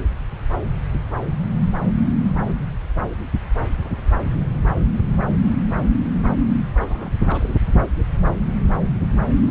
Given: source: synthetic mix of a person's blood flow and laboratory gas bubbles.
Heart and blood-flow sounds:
Doppler ultrasound of blood flow; subclavian vein
6.80-7.13 s: bubbles
7.22-7.54 s: bubbles
From the record:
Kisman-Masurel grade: 211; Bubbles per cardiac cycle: several, 3 to 8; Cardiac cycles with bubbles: 1 to 10%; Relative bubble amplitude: barely perceptible (0.100 to 0.250); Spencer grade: 1 (occasional bubble signal discernible with the cardiac motion signal, with majority of cardiac periods free of bubbles); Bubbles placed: anywhere in the cardiac cycle

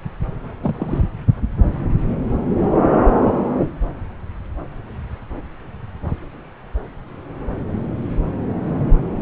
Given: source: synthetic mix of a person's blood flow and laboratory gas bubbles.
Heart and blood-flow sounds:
Doppler ultrasound of blood flow; subclavian vein
0.62-1.01 s: bubbles
From the record:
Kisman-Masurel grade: 211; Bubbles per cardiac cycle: several, 3 to 8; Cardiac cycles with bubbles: 1 to 10%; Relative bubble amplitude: barely perceptible (0.100 to 0.250); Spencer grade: 1 (occasional bubble signal discernible with the cardiac motion signal, with majority of cardiac periods free of bubbles); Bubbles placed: anywhere in the cardiac cycle

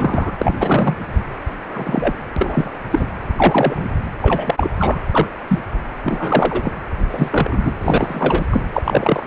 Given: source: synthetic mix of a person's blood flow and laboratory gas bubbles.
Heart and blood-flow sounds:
Doppler ultrasound of blood flow; precordium
0.00-0.31 s: bubbles
0.38-0.97 s: bubbles
1.73-2.15 s: bubbles
2.36-2.71 s: bubbles
2.90-3.06 s: bubbles
3.36-3.94 s: bubbles
4.21-4.71 s: bubbles
4.78-5.01 s: bubbles
5.11-5.27 s: bubbles
5.47-5.59 s: bubbles
6.04-6.72 s: bubbles
7.10-7.71 s: bubbles
7.80-8.46 s: bubbles
8.51-8.61 s: bubbles
8.72-9.27 s: bubbles
From the record:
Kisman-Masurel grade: 243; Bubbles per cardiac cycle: several, 3 to 8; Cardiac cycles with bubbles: 100%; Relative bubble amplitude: loud (0.450 to 0.775); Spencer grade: 3 (all of the cardiac periods contain showers or single bubble signals, but not dominating or overriding the cardiac motion signals); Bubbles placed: anywhere in the cardiac cycle

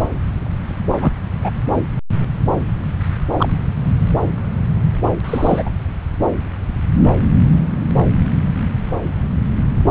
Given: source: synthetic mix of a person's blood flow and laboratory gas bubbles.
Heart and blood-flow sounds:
Doppler ultrasound of blood flow; subclavian vein
1.00-1.12 s: bubbles
1.41-1.50 s: bubbles
3.38-3.48 s: bubbles
5.24-5.71 s: bubbles
From the record:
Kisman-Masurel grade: 122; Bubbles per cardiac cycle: 1 to 2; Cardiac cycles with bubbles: 10 to 50%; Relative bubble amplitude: moderate (0.250 to 0.450); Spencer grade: 2 (many but less than half of the cardiac periods contain bubble signals, singularly or in groups); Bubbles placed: anywhere in the cardiac cycle

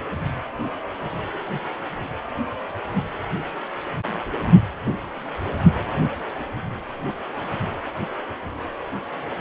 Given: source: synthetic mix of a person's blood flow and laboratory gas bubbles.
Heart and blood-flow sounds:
Doppler ultrasound of blood flow; precordium
4.85-4.96 s: bubbles
From the record:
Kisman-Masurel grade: 111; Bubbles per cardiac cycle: 1 to 2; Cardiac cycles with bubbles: 1 to 10%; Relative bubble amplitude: barely perceptible (0.100 to 0.250); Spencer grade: 1 (occasional bubble signal discernible with the cardiac motion signal, with majority of cardiac periods free of bubbles); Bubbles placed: anywhere in the cardiac cycle

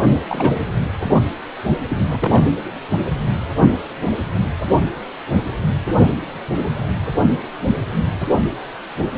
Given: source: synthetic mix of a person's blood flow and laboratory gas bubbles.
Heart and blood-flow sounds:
Doppler ultrasound of blood flow; precordium
0.03-0.10 s: bubbles
0.27-0.68 s: bubbles
1.90-2.04 s: bubbles
2.10-2.48 s: bubbles
From the record:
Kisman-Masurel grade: 212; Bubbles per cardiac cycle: several, 3 to 8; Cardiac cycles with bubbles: 1 to 10%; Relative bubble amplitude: moderate (0.250 to 0.450); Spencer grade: 1 (occasional bubble signal discernible with the cardiac motion signal, with majority of cardiac periods free of bubbles); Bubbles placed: anywhere in the cardiac cycle

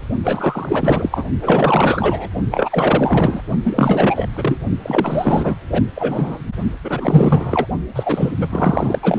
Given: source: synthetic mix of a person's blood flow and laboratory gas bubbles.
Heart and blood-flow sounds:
Doppler ultrasound of blood flow; precordium
0.23-1.24 s: bubbles
1.41-2.29 s: bubbles
2.52-3.42 s: bubbles
3.64-4.27 s: bubbles
4.37-4.61 s: bubbles
4.82-5.55 s: bubbles
5.71-5.83 s: bubbles
5.95-6.38 s: bubbles
6.84-7.67 s: bubbles
7.96-8.31 s: bubbles
8.40-8.99 s: bubbles
9.02-9.19 s: bubbles
From the record:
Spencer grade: 4 (maximum detectable bubble signal sounding continuously throughout systole and diastole of every cardiac period, and overriding the amplitude of the normal cardiac signals); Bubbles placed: only in the low amplitude regions of the cardiac cycle

